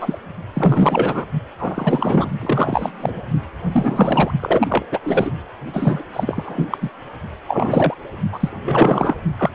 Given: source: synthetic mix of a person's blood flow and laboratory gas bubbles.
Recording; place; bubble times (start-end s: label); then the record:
Doppler ultrasound of blood flow; precordium
0.00-0.18 s: bubbles
0.53-1.25 s: bubbles
1.58-2.29 s: bubbles
2.41-2.91 s: bubbles
3.00-3.21 s: bubbles
3.72-4.32 s: bubbles
4.40-4.83 s: bubbles
4.92-4.99 s: bubbles
5.03-5.31 s: bubbles
5.74-6.03 s: bubbles
6.13-6.78 s: bubbles
6.82-6.90 s: bubbles
7.47-7.94 s: bubbles
8.32-9.15 s: bubbles
9.38-9.51 s: bubbles
From the record:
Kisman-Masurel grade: 342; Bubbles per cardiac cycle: rolling drumbeat, 9 or more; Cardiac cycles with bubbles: 100%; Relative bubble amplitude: moderate (0.250 to 0.450); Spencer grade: 3 (all of the cardiac periods contain showers or single bubble signals, but not dominating or overriding the cardiac motion signals); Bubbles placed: only in the low amplitude regions of the cardiac cycle